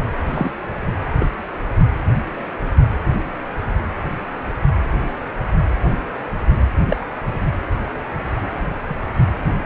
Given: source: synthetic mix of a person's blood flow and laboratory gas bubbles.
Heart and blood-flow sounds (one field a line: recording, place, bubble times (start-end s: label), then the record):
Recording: Doppler ultrasound of blood flow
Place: precordium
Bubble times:
0.26-0.51 s: bubbles
1.15-1.27 s: bubbles
6.90-7.02 s: bubbles
8.90-8.95 s: bubbles
From the record:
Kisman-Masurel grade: 122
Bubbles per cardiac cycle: 1 to 2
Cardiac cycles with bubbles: 10 to 50%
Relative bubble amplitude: moderate (0.250 to 0.450)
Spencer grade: 2 (many but less than half of the cardiac periods contain bubble signals, singularly or in groups)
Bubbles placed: anywhere in the cardiac cycle